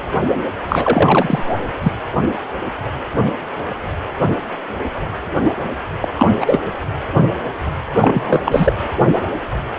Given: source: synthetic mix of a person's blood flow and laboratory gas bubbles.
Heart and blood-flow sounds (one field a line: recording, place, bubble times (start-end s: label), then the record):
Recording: Doppler ultrasound of blood flow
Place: precordium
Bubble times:
0.68-1.56 s: bubbles
1.82-1.93 s: bubbles
6.00-6.08 s: bubbles
6.13-6.59 s: bubbles
8.01-8.41 s: bubbles
8.45-8.73 s: bubbles
From the record:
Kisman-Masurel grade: 223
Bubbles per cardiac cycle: several, 3 to 8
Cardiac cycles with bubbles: 10 to 50%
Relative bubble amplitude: loud (0.450 to 0.775)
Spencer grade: 2 (many but less than half of the cardiac periods contain bubble signals, singularly or in groups)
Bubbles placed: anywhere in the cardiac cycle